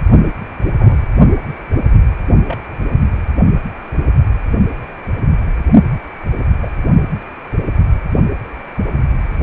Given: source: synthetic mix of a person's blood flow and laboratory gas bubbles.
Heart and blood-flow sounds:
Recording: Doppler ultrasound of blood flow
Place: precordium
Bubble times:
0.78-0.98 s: bubbles
2.47-2.58 s: bubbles
6.61-6.70 s: bubbles
From the record:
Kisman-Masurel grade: 122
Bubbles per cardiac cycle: 1 to 2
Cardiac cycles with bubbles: 10 to 50%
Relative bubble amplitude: moderate (0.250 to 0.450)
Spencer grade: 2 (many but less than half of the cardiac periods contain bubble signals, singularly or in groups)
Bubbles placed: only in the low amplitude regions of the cardiac cycle

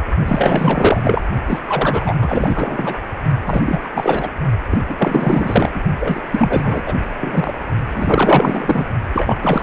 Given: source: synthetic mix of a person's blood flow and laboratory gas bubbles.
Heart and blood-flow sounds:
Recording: Doppler ultrasound of blood flow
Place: precordium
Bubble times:
0.26-1.21 s: bubbles
1.46-1.62 s: bubbles
1.67-2.15 s: bubbles
2.21-2.98 s: bubbles
3.46-3.79 s: bubbles
3.83-3.89 s: bubbles
3.94-4.29 s: bubbles
4.70-4.79 s: bubbles
4.89-5.69 s: bubbles
5.74-5.81 s: bubbles
6.00-6.22 s: bubbles
6.30-6.96 s: bubbles
7.20-7.54 s: bubbles
7.93-8.87 s: bubbles
9.13-9.37 s: bubbles
9.42-9.63 s: bubbles
From the record:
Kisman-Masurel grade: 444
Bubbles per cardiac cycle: continuous sound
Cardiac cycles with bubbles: 100%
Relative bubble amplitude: maximal (0.775 to 0.999)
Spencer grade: 4 (maximum detectable bubble signal sounding continuously throughout systole and diastole of every cardiac period, and overriding the amplitude of the normal cardiac signals)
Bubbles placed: only in the low amplitude regions of the cardiac cycle

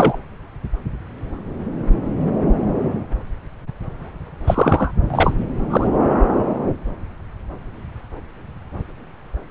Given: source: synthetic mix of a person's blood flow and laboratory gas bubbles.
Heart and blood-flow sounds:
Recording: Doppler ultrasound of blood flow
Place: subclavian vein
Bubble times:
0.00-0.17 s: bubbles
4.47-4.92 s: bubbles
5.10-5.33 s: bubbles
5.70-5.87 s: bubbles
From the record:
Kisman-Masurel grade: 223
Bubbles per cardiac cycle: several, 3 to 8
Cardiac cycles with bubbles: 10 to 50%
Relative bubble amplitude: loud (0.450 to 0.775)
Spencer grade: 2 (many but less than half of the cardiac periods contain bubble signals, singularly or in groups)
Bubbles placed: anywhere in the cardiac cycle

